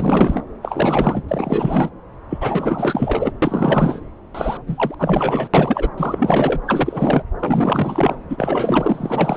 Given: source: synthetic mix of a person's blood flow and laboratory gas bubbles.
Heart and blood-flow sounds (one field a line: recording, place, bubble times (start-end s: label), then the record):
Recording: Doppler ultrasound of blood flow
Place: subclavian vein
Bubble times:
0.00-0.42 s: bubbles
0.62-1.23 s: bubbles
1.28-1.90 s: bubbles
2.29-3.32 s: bubbles
3.42-4.00 s: bubbles
4.34-4.58 s: bubbles
4.67-4.95 s: bubbles
4.99-5.48 s: bubbles
5.54-5.90 s: bubbles
5.98-6.61 s: bubbles
6.67-7.25 s: bubbles
7.39-8.16 s: bubbles
8.29-9.37 s: bubbles
From the record:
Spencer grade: 4 (maximum detectable bubble signal sounding continuously throughout systole and diastole of every cardiac period, and overriding the amplitude of the normal cardiac signals)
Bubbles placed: anywhere in the cardiac cycle